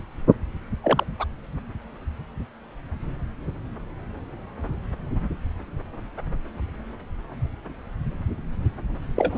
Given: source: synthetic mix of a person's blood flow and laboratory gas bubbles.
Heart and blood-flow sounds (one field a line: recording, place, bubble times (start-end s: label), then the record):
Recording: Doppler ultrasound of blood flow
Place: subclavian vein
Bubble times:
0.84-1.03 s: bubbles
1.19-1.25 s: bubbles
9.16-9.38 s: bubbles
From the record:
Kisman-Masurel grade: 222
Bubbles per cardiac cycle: several, 3 to 8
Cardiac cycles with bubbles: 10 to 50%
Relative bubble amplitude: moderate (0.250 to 0.450)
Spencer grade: 2 (many but less than half of the cardiac periods contain bubble signals, singularly or in groups)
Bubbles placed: anywhere in the cardiac cycle